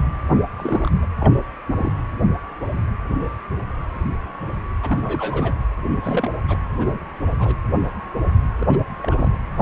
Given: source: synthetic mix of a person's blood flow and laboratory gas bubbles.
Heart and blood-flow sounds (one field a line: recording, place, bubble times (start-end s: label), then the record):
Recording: Doppler ultrasound of blood flow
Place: precordium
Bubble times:
0.57-0.91 s: bubbles
1.02-1.06 s: bubbles
1.20-1.33 s: bubbles
1.77-1.93 s: bubbles
4.83-5.62 s: bubbles
6.02-6.30 s: bubbles
6.48-6.58 s: bubbles
6.79-6.99 s: bubbles
7.39-7.56 s: bubbles
8.60-8.67 s: bubbles
8.69-8.78 s: bubbles
8.98-9.37 s: bubbles
From the record:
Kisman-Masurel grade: 221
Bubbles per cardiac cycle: several, 3 to 8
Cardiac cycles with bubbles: 10 to 50%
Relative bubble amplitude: barely perceptible (0.100 to 0.250)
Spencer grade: 2 (many but less than half of the cardiac periods contain bubble signals, singularly or in groups)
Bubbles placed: anywhere in the cardiac cycle